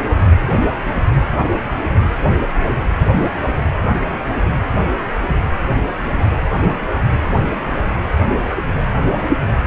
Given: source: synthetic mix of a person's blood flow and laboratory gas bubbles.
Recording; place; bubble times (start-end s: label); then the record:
Doppler ultrasound of blood flow; precordium
6.13-6.23 s: bubbles
From the record:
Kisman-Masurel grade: 111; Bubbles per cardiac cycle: 1 to 2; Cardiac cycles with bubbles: 1 to 10%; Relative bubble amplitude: barely perceptible (0.100 to 0.250); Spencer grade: 1 (occasional bubble signal discernible with the cardiac motion signal, with majority of cardiac periods free of bubbles); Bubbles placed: anywhere in the cardiac cycle